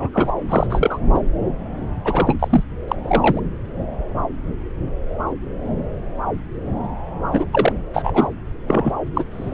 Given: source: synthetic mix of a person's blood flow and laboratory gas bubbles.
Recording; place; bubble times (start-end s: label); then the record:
Doppler ultrasound of blood flow; subclavian vein
0.00-0.09 s: bubbles
0.13-0.32 s: bubbles
0.48-0.67 s: bubbles
0.69-0.98 s: bubbles
1.14-1.19 s: bubbles
2.04-2.64 s: bubbles
2.88-2.96 s: bubbles
3.04-3.41 s: bubbles
7.32-7.46 s: bubbles
7.52-7.72 s: bubbles
7.94-8.28 s: bubbles
8.68-8.92 s: bubbles
9.14-9.24 s: bubbles
9.31-9.54 s: bubbles
From the record:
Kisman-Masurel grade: 333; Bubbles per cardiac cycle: rolling drumbeat, 9 or more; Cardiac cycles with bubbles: 50 to 99%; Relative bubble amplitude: loud (0.450 to 0.775); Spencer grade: 3 (all of the cardiac periods contain showers or single bubble signals, but not dominating or overriding the cardiac motion signals); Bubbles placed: anywhere in the cardiac cycle